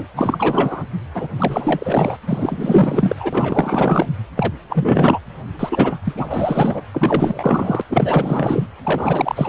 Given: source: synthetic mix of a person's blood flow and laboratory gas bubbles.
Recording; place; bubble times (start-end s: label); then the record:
Doppler ultrasound of blood flow; precordium
0.00-0.07 s: bubbles
0.15-0.83 s: bubbles
1.15-1.29 s: bubbles
1.38-2.17 s: bubbles
2.27-3.16 s: bubbles
3.20-4.08 s: bubbles
4.37-4.53 s: bubbles
4.69-5.19 s: bubbles
5.59-5.99 s: bubbles
6.04-6.82 s: bubbles
6.94-7.82 s: bubbles
7.89-8.67 s: bubbles
8.83-9.49 s: bubbles
From the record:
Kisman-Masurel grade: 444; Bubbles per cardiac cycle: continuous sound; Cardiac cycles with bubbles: 100%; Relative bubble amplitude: maximal (0.775 to 0.999); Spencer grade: 4 (maximum detectable bubble signal sounding continuously throughout systole and diastole of every cardiac period, and overriding the amplitude of the normal cardiac signals); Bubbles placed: anywhere in the cardiac cycle